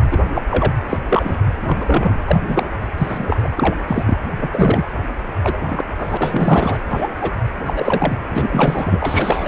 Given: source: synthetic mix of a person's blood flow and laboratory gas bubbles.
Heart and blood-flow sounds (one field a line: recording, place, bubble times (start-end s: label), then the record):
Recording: Doppler ultrasound of blood flow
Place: precordium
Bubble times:
0.10-0.18 s: bubbles
0.34-0.42 s: bubbles
0.51-0.74 s: bubbles
0.89-0.98 s: bubbles
1.09-1.42 s: bubbles
1.67-2.18 s: bubbles
2.27-2.64 s: bubbles
2.98-3.48 s: bubbles
3.57-3.75 s: bubbles
3.87-4.17 s: bubbles
4.39-4.48 s: bubbles
4.52-4.87 s: bubbles
5.41-5.58 s: bubbles
5.67-5.85 s: bubbles
5.98-6.79 s: bubbles
6.90-7.08 s: bubbles
7.21-7.31 s: bubbles
7.66-8.18 s: bubbles
8.30-9.48 s: bubbles
From the record:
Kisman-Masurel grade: 232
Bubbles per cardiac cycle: several, 3 to 8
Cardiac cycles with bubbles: 50 to 99%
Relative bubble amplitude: moderate (0.250 to 0.450)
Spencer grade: 3 (all of the cardiac periods contain showers or single bubble signals, but not dominating or overriding the cardiac motion signals)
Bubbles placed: anywhere in the cardiac cycle